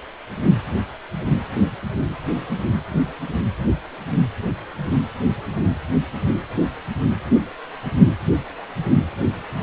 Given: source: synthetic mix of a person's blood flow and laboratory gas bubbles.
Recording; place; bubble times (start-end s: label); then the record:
Doppler ultrasound of blood flow; precordium
no bubbles
From the record:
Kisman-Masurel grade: 000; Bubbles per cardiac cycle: 0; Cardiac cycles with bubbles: 0%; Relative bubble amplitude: no bubbles discernible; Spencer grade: 0 (complete lack of bubble signals)